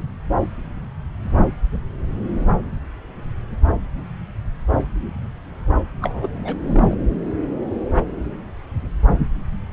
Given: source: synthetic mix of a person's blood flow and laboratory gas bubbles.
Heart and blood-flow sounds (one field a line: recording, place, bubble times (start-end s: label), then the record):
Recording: Doppler ultrasound of blood flow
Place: subclavian vein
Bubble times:
6.01-6.28 s: bubbles
6.45-6.55 s: bubbles
6.63-6.95 s: bubbles
From the record:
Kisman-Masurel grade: 221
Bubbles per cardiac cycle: several, 3 to 8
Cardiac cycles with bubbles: 10 to 50%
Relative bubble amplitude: barely perceptible (0.100 to 0.250)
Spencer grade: 2 (many but less than half of the cardiac periods contain bubble signals, singularly or in groups)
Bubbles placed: anywhere in the cardiac cycle